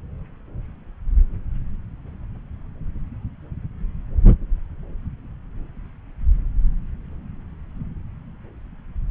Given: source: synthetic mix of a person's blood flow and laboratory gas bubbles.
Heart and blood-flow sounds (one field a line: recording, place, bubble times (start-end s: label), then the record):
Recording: Doppler ultrasound of blood flow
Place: subclavian vein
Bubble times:
no bubbles
From the record:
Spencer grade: 0 (complete lack of bubble signals)